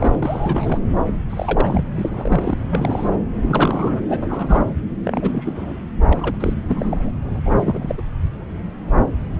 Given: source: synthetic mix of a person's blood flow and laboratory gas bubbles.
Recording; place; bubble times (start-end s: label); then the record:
Doppler ultrasound of blood flow; subclavian vein
0.00-0.19 s: bubbles
0.22-0.80 s: bubbles
1.06-1.12 s: bubbles
1.29-1.83 s: bubbles
1.96-2.58 s: bubbles
2.71-3.16 s: bubbles
3.42-4.01 s: bubbles
4.08-4.71 s: bubbles
5.04-5.83 s: bubbles
6.07-6.36 s: bubbles
6.40-6.54 s: bubbles
6.67-7.12 s: bubbles
7.24-7.41 s: bubbles
7.45-7.95 s: bubbles
7.97-8.02 s: bubbles
From the record:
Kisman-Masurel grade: 332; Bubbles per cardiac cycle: rolling drumbeat, 9 or more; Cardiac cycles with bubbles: 50 to 99%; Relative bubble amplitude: moderate (0.250 to 0.450); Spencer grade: 3 (all of the cardiac periods contain showers or single bubble signals, but not dominating or overriding the cardiac motion signals); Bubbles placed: anywhere in the cardiac cycle